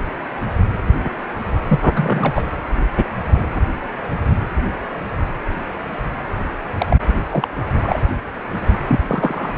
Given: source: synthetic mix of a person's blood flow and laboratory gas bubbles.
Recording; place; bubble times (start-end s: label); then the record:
Doppler ultrasound of blood flow; precordium
1.68-2.42 s: bubbles
6.78-6.87 s: bubbles
6.90-6.96 s: bubbles
7.30-7.48 s: bubbles
7.82-8.00 s: bubbles
8.88-9.00 s: bubbles
9.08-9.54 s: bubbles
From the record:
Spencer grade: 2 (many but less than half of the cardiac periods contain bubble signals, singularly or in groups); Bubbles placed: anywhere in the cardiac cycle